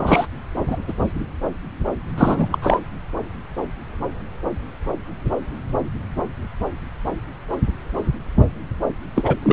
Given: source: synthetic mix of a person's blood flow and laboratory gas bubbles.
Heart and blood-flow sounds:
Doppler ultrasound of blood flow; subclavian vein
0.00-0.26 s: bubbles
0.67-0.76 s: bubbles
0.88-0.94 s: bubbles
2.17-2.48 s: bubbles
2.52-2.58 s: bubbles
2.62-2.79 s: bubbles
9.15-9.35 s: bubbles
9.43-9.52 s: bubbles
From the record:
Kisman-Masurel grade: 223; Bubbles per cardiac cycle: several, 3 to 8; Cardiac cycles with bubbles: 10 to 50%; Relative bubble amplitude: loud (0.450 to 0.775); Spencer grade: 2 (many but less than half of the cardiac periods contain bubble signals, singularly or in groups); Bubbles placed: anywhere in the cardiac cycle

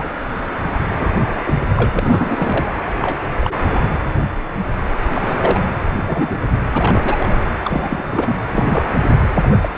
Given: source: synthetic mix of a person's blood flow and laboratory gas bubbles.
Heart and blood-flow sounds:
Doppler ultrasound of blood flow; precordium
0.00-0.10 s: bubbles
0.98-1.07 s: bubbles
1.46-1.54 s: bubbles
1.74-1.91 s: bubbles
1.95-2.74 s: bubbles
3.00-3.20 s: bubbles
3.40-3.89 s: bubbles
5.15-5.71 s: bubbles
5.82-6.38 s: bubbles
6.52-6.57 s: bubbles
6.74-7.38 s: bubbles
7.62-8.04 s: bubbles
8.09-8.38 s: bubbles
8.50-8.89 s: bubbles
9.34-9.56 s: bubbles
9.62-9.69 s: bubbles
From the record:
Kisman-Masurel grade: 232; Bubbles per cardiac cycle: several, 3 to 8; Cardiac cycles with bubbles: 50 to 99%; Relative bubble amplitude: moderate (0.250 to 0.450); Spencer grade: 3 (all of the cardiac periods contain showers or single bubble signals, but not dominating or overriding the cardiac motion signals); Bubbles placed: anywhere in the cardiac cycle

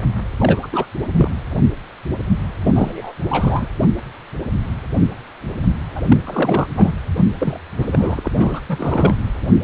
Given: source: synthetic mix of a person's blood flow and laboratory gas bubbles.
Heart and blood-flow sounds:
Doppler ultrasound of blood flow; precordium
0.38-0.67 s: bubbles
0.73-0.86 s: bubbles
1.17-1.31 s: bubbles
2.63-3.14 s: bubbles
3.29-3.68 s: bubbles
5.95-6.01 s: bubbles
6.07-6.17 s: bubbles
6.25-6.67 s: bubbles
6.76-6.94 s: bubbles
7.14-7.25 s: bubbles
7.39-7.59 s: bubbles
7.78-8.20 s: bubbles
8.24-8.31 s: bubbles
8.38-8.62 s: bubbles
8.69-9.15 s: bubbles
From the record:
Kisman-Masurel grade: 332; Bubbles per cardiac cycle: rolling drumbeat, 9 or more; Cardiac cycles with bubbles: 50 to 99%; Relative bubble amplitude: moderate (0.250 to 0.450); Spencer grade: 3 (all of the cardiac periods contain showers or single bubble signals, but not dominating or overriding the cardiac motion signals); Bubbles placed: anywhere in the cardiac cycle

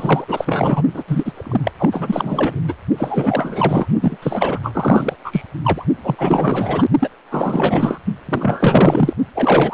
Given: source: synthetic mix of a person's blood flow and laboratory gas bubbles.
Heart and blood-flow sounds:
Doppler ultrasound of blood flow; precordium
0.00-0.83 s: bubbles
0.93-1.03 s: bubbles
1.07-1.71 s: bubbles
1.78-2.60 s: bubbles
2.68-2.74 s: bubbles
2.98-3.88 s: bubbles
4.01-4.17 s: bubbles
4.22-4.59 s: bubbles
4.62-5.15 s: bubbles
5.24-5.42 s: bubbles
5.63-5.84 s: bubbles
6.03-6.85 s: bubbles
7.00-7.09 s: bubbles
7.30-7.98 s: bubbles
8.29-9.13 s: bubbles
9.35-9.74 s: bubbles
From the record:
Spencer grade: 4 (maximum detectable bubble signal sounding continuously throughout systole and diastole of every cardiac period, and overriding the amplitude of the normal cardiac signals); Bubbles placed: only in the low amplitude regions of the cardiac cycle

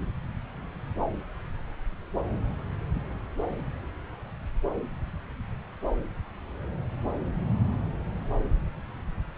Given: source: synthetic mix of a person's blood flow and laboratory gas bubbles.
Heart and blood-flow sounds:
Doppler ultrasound of blood flow; subclavian vein
no bubbles
From the record:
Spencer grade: 0 (complete lack of bubble signals)

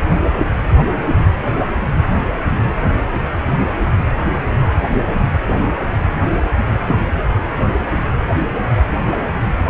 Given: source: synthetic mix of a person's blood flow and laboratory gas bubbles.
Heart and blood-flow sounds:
Doppler ultrasound of blood flow; precordium
6.87-6.95 s: bubbles
From the record:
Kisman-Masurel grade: 113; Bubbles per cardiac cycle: 1 to 2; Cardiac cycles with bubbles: 1 to 10%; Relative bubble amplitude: loud (0.450 to 0.775); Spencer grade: 1 (occasional bubble signal discernible with the cardiac motion signal, with majority of cardiac periods free of bubbles); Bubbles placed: anywhere in the cardiac cycle

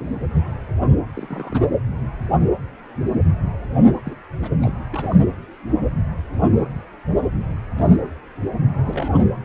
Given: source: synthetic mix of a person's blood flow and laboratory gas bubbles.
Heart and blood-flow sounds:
Doppler ultrasound of blood flow; precordium
0.00-0.20 s: bubbles
1.14-1.62 s: bubbles
4.05-4.16 s: bubbles
4.43-4.50 s: bubbles
4.62-4.75 s: bubbles
4.91-5.18 s: bubbles
7.77-7.96 s: bubbles
8.78-9.19 s: bubbles
From the record:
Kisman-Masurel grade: 221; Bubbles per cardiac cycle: several, 3 to 8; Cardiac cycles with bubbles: 10 to 50%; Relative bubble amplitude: barely perceptible (0.100 to 0.250); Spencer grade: 2 (many but less than half of the cardiac periods contain bubble signals, singularly or in groups); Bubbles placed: anywhere in the cardiac cycle

